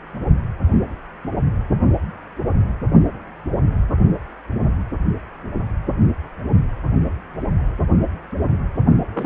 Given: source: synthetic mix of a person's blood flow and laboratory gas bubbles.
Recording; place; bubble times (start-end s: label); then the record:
Doppler ultrasound of blood flow; precordium
9.13-9.26 s: bubbles
From the record:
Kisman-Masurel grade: 212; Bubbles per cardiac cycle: several, 3 to 8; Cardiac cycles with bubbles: 1 to 10%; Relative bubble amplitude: moderate (0.250 to 0.450); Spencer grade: 1 (occasional bubble signal discernible with the cardiac motion signal, with majority of cardiac periods free of bubbles); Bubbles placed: only in the low amplitude regions of the cardiac cycle